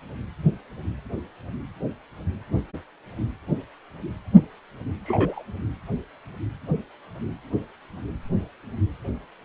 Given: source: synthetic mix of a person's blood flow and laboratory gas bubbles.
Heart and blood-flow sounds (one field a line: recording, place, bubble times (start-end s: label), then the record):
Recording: Doppler ultrasound of blood flow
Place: precordium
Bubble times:
5.04-5.43 s: bubbles
From the record:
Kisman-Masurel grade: 112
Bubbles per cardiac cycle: 1 to 2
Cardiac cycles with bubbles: 1 to 10%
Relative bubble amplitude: moderate (0.250 to 0.450)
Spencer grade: 1 (occasional bubble signal discernible with the cardiac motion signal, with majority of cardiac periods free of bubbles)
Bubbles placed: anywhere in the cardiac cycle